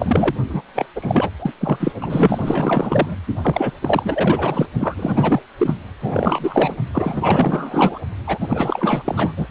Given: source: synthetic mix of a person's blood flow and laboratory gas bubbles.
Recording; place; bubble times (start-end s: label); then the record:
Doppler ultrasound of blood flow; precordium
0.00-0.34 s: bubbles
0.49-0.61 s: bubbles
0.74-0.86 s: bubbles
0.95-1.30 s: bubbles
1.40-1.53 s: bubbles
1.60-1.93 s: bubbles
2.00-3.16 s: bubbles
3.43-3.72 s: bubbles
3.82-4.67 s: bubbles
4.79-5.42 s: bubbles
5.58-5.74 s: bubbles
6.02-6.76 s: bubbles
6.92-7.99 s: bubbles
8.26-9.47 s: bubbles
From the record:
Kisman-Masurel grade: 444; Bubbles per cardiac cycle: continuous sound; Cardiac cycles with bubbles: 100%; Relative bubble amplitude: maximal (0.775 to 0.999); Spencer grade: 4 (maximum detectable bubble signal sounding continuously throughout systole and diastole of every cardiac period, and overriding the amplitude of the normal cardiac signals); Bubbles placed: only in the low amplitude regions of the cardiac cycle